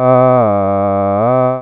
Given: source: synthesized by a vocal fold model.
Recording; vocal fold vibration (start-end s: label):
sustained vowel that changes in the middle
0.00-0.33 s: 127.5 Hz, open quotient 0.49
0.53-1.13 s: 99.4 Hz, open quotient 0.38
1.33-1.62 s: 127.5 Hz, open quotient 0.49